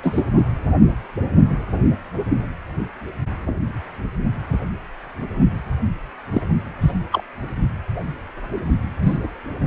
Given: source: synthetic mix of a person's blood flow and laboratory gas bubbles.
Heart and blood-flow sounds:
Doppler ultrasound of blood flow; precordium
0.02-0.24 s: bubbles
6.33-6.42 s: bubbles
6.81-6.93 s: bubbles
7.12-7.23 s: bubbles
9.03-9.17 s: bubbles
From the record:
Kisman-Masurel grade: 122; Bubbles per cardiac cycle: 1 to 2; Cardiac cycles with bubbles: 10 to 50%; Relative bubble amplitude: moderate (0.250 to 0.450); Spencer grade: 2 (many but less than half of the cardiac periods contain bubble signals, singularly or in groups); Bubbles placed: only in the low amplitude regions of the cardiac cycle

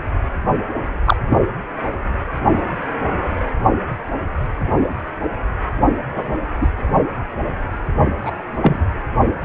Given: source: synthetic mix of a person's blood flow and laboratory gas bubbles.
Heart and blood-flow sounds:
Doppler ultrasound of blood flow; precordium
1.05-1.16 s: bubbles
1.29-1.38 s: bubbles
6.14-6.35 s: bubbles
6.60-6.67 s: bubbles
8.21-8.32 s: bubbles
8.62-8.83 s: bubbles
From the record:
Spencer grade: 2 (many but less than half of the cardiac periods contain bubble signals, singularly or in groups); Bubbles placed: anywhere in the cardiac cycle

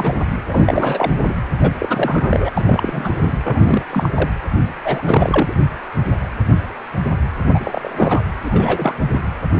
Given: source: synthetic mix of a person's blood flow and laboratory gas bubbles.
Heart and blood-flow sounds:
Doppler ultrasound of blood flow; precordium
0.00-0.23 s: bubbles
0.49-1.11 s: bubbles
1.26-1.33 s: bubbles
1.60-1.72 s: bubbles
1.79-2.53 s: bubbles
2.57-3.38 s: bubbles
3.44-3.83 s: bubbles
3.90-4.09 s: bubbles
4.14-4.30 s: bubbles
4.84-5.53 s: bubbles
7.54-8.23 s: bubbles
8.42-8.94 s: bubbles
9.12-9.20 s: bubbles
From the record:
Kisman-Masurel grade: 333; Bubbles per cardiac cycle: rolling drumbeat, 9 or more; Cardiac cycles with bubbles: 50 to 99%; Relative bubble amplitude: loud (0.450 to 0.775); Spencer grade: 3 (all of the cardiac periods contain showers or single bubble signals, but not dominating or overriding the cardiac motion signals); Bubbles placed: anywhere in the cardiac cycle

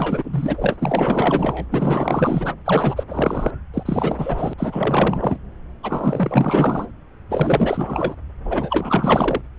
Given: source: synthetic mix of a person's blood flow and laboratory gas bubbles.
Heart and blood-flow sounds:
Doppler ultrasound of blood flow; subclavian vein
0.00-0.76 s: bubbles
0.79-1.66 s: bubbles
1.71-2.54 s: bubbles
2.65-3.03 s: bubbles
3.09-3.51 s: bubbles
3.73-4.54 s: bubbles
4.57-5.38 s: bubbles
5.83-6.87 s: bubbles
7.29-8.16 s: bubbles
8.44-9.41 s: bubbles
From the record:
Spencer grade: 4 (maximum detectable bubble signal sounding continuously throughout systole and diastole of every cardiac period, and overriding the amplitude of the normal cardiac signals); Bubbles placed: anywhere in the cardiac cycle

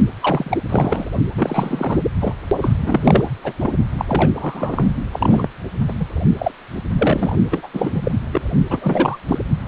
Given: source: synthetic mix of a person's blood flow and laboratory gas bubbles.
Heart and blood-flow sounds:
Doppler ultrasound of blood flow; precordium
0.20-0.57 s: bubbles
0.68-1.10 s: bubbles
1.35-1.99 s: bubbles
2.21-2.33 s: bubbles
2.57-3.23 s: bubbles
3.44-3.52 s: bubbles
3.60-3.71 s: bubbles
3.98-4.05 s: bubbles
4.08-4.29 s: bubbles
4.33-4.90 s: bubbles
5.12-5.49 s: bubbles
5.88-5.92 s: bubbles
5.99-6.05 s: bubbles
6.38-6.51 s: bubbles
6.97-7.38 s: bubbles
7.51-7.68 s: bubbles
7.73-8.12 s: bubbles
8.32-8.41 s: bubbles
8.69-9.18 s: bubbles
9.27-9.38 s: bubbles
From the record:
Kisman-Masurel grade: 342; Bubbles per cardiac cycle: rolling drumbeat, 9 or more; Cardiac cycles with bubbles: 100%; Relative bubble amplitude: moderate (0.250 to 0.450); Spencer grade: 3 (all of the cardiac periods contain showers or single bubble signals, but not dominating or overriding the cardiac motion signals); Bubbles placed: only in the low amplitude regions of the cardiac cycle

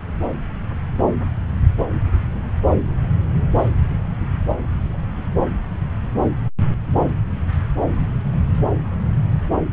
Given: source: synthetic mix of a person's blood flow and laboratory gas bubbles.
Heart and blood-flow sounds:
Doppler ultrasound of blood flow; subclavian vein
no bubbles
From the record:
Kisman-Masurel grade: 000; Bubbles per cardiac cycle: 0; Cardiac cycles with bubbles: 0%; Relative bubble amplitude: no bubbles discernible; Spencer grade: 0 (complete lack of bubble signals)

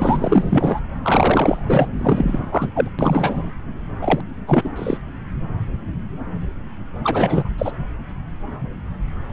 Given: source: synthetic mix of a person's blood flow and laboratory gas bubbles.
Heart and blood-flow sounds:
Doppler ultrasound of blood flow; subclavian vein
0.00-0.80 s: bubbles
1.03-1.88 s: bubbles
1.98-2.46 s: bubbles
2.52-2.69 s: bubbles
2.75-2.88 s: bubbles
2.98-3.51 s: bubbles
4.02-4.21 s: bubbles
4.47-4.70 s: bubbles
4.76-4.98 s: bubbles
7.04-7.50 s: bubbles
7.58-7.72 s: bubbles
From the record:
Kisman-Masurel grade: 333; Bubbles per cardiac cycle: rolling drumbeat, 9 or more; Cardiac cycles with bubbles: 50 to 99%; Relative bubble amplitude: loud (0.450 to 0.775); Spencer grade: 3 (all of the cardiac periods contain showers or single bubble signals, but not dominating or overriding the cardiac motion signals); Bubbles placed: anywhere in the cardiac cycle

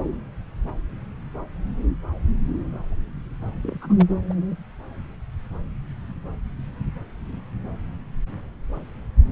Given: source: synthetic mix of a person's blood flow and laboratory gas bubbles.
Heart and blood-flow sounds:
Doppler ultrasound of blood flow; subclavian vein
3.62-3.75 s: bubbles
3.81-4.06 s: bubbles
4.30-4.33 s: bubbles
From the record:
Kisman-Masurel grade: 211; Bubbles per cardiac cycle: several, 3 to 8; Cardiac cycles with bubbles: 1 to 10%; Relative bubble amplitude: barely perceptible (0.100 to 0.250); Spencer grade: 1 (occasional bubble signal discernible with the cardiac motion signal, with majority of cardiac periods free of bubbles); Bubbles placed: anywhere in the cardiac cycle

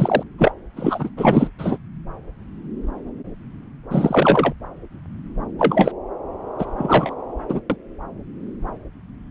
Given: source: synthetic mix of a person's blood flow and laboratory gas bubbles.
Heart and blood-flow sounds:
Doppler ultrasound of blood flow; subclavian vein
0.00-0.23 s: bubbles
0.39-0.52 s: bubbles
0.76-1.09 s: bubbles
1.17-1.49 s: bubbles
1.58-1.78 s: bubbles
3.90-4.54 s: bubbles
5.58-5.92 s: bubbles
6.58-6.65 s: bubbles
6.78-7.15 s: bubbles
7.48-7.61 s: bubbles
7.70-7.76 s: bubbles
From the record:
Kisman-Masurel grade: 233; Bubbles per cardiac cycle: several, 3 to 8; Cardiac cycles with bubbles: 50 to 99%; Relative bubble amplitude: loud (0.450 to 0.775); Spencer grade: 3 (all of the cardiac periods contain showers or single bubble signals, but not dominating or overriding the cardiac motion signals); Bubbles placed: anywhere in the cardiac cycle

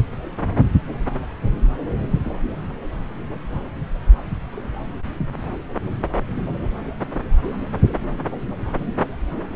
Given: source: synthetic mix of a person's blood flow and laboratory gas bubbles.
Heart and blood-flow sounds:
Doppler ultrasound of blood flow; subclavian vein
2.07-2.19 s: bubbles
2.23-2.31 s: bubbles
6.35-6.43 s: bubbles
From the record:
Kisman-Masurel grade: 111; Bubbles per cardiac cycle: 1 to 2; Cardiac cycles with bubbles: 1 to 10%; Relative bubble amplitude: barely perceptible (0.100 to 0.250); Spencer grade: 1 (occasional bubble signal discernible with the cardiac motion signal, with majority of cardiac periods free of bubbles); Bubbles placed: anywhere in the cardiac cycle

